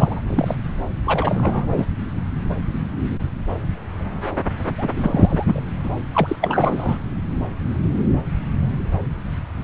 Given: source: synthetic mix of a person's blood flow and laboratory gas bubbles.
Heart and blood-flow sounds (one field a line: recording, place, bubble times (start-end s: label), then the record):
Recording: Doppler ultrasound of blood flow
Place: subclavian vein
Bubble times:
0.00-0.21 s: bubbles
0.27-0.56 s: bubbles
1.06-1.66 s: bubbles
1.69-1.85 s: bubbles
4.77-4.88 s: bubbles
4.96-5.62 s: bubbles
5.83-5.90 s: bubbles
6.14-6.36 s: bubbles
6.41-6.97 s: bubbles
From the record:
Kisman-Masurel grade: 223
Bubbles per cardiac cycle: several, 3 to 8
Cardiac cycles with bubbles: 10 to 50%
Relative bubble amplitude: loud (0.450 to 0.775)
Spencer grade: 2 (many but less than half of the cardiac periods contain bubble signals, singularly or in groups)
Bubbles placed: anywhere in the cardiac cycle